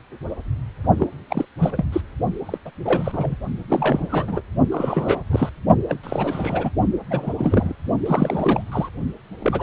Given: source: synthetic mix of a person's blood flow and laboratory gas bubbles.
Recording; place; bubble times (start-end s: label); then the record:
Doppler ultrasound of blood flow; precordium
0.98-1.07 s: bubbles
1.30-1.45 s: bubbles
1.57-1.85 s: bubbles
1.92-2.01 s: bubbles
2.46-2.58 s: bubbles
2.65-2.71 s: bubbles
2.84-3.35 s: bubbles
3.69-4.42 s: bubbles
4.71-5.20 s: bubbles
5.30-5.50 s: bubbles
5.88-5.98 s: bubbles
6.03-6.70 s: bubbles
7.10-7.33 s: bubbles
7.38-7.73 s: bubbles
8.05-8.62 s: bubbles
8.71-8.89 s: bubbles
9.39-9.62 s: bubbles
From the record:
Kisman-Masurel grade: 332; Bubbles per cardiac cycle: rolling drumbeat, 9 or more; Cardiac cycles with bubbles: 50 to 99%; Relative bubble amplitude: moderate (0.250 to 0.450); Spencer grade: 3 (all of the cardiac periods contain showers or single bubble signals, but not dominating or overriding the cardiac motion signals); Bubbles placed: only in the low amplitude regions of the cardiac cycle